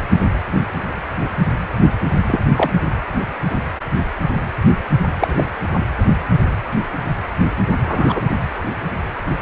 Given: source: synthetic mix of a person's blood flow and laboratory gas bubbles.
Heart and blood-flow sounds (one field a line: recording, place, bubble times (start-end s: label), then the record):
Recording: Doppler ultrasound of blood flow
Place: precordium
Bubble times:
1.80-1.90 s: bubbles
2.26-2.40 s: bubbles
2.56-2.73 s: bubbles
5.19-5.49 s: bubbles
7.83-8.21 s: bubbles
From the record:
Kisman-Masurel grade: 123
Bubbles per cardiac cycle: 1 to 2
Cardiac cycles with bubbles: 10 to 50%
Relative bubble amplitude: loud (0.450 to 0.775)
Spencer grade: 2 (many but less than half of the cardiac periods contain bubble signals, singularly or in groups)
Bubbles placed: anywhere in the cardiac cycle